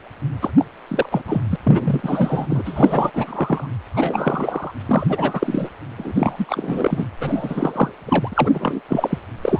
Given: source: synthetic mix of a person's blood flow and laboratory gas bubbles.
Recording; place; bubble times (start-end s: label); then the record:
Doppler ultrasound of blood flow; precordium
0.41-0.53 s: bubbles
0.58-0.65 s: bubbles
0.88-1.22 s: bubbles
1.27-1.41 s: bubbles
1.50-1.56 s: bubbles
1.63-2.62 s: bubbles
2.65-3.10 s: bubbles
3.13-3.68 s: bubbles
3.93-4.71 s: bubbles
4.85-5.70 s: bubbles
5.98-7.07 s: bubbles
7.20-7.95 s: bubbles
8.06-8.81 s: bubbles
8.89-9.18 s: bubbles
9.43-9.60 s: bubbles
From the record:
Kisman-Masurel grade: 343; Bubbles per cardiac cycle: rolling drumbeat, 9 or more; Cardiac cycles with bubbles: 100%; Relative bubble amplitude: loud (0.450 to 0.775); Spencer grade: 3 (all of the cardiac periods contain showers or single bubble signals, but not dominating or overriding the cardiac motion signals); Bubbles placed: anywhere in the cardiac cycle